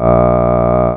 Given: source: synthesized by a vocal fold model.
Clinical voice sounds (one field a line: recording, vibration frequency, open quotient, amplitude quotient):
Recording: sustained vowel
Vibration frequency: 60 Hz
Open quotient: 0.3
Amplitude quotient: 1.1